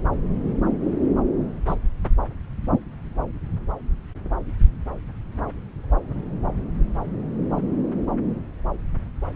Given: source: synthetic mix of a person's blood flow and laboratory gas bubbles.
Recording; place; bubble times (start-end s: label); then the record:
Doppler ultrasound of blood flow; subclavian vein
1.67-1.76 s: bubbles
From the record:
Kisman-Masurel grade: 113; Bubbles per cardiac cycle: 1 to 2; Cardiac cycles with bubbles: 1 to 10%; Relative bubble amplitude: loud (0.450 to 0.775); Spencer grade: 1 (occasional bubble signal discernible with the cardiac motion signal, with majority of cardiac periods free of bubbles); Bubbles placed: anywhere in the cardiac cycle